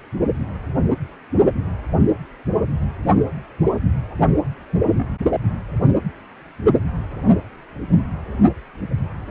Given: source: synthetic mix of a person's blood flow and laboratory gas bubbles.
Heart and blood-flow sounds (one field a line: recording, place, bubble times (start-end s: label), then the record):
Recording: Doppler ultrasound of blood flow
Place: precordium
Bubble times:
4.96-5.12 s: bubbles
From the record:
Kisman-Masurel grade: 111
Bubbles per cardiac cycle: 1 to 2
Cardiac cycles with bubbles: 1 to 10%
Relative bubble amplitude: barely perceptible (0.100 to 0.250)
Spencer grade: 1 (occasional bubble signal discernible with the cardiac motion signal, with majority of cardiac periods free of bubbles)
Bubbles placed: only in the low amplitude regions of the cardiac cycle